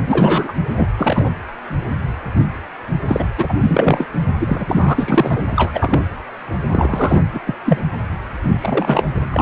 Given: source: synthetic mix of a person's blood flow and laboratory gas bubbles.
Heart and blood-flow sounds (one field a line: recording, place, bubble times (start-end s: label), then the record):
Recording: Doppler ultrasound of blood flow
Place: precordium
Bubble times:
0.07-0.53 s: bubbles
0.77-0.88 s: bubbles
0.98-1.31 s: bubbles
3.08-3.27 s: bubbles
3.38-3.54 s: bubbles
3.61-4.08 s: bubbles
4.40-4.96 s: bubbles
4.98-5.45 s: bubbles
5.51-6.02 s: bubbles
6.70-7.21 s: bubbles
7.34-7.40 s: bubbles
7.46-7.55 s: bubbles
7.64-7.81 s: bubbles
8.57-9.06 s: bubbles
9.30-9.42 s: bubbles
From the record:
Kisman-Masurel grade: 233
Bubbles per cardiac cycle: several, 3 to 8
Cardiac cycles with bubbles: 50 to 99%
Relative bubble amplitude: loud (0.450 to 0.775)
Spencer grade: 3 (all of the cardiac periods contain showers or single bubble signals, but not dominating or overriding the cardiac motion signals)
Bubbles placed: anywhere in the cardiac cycle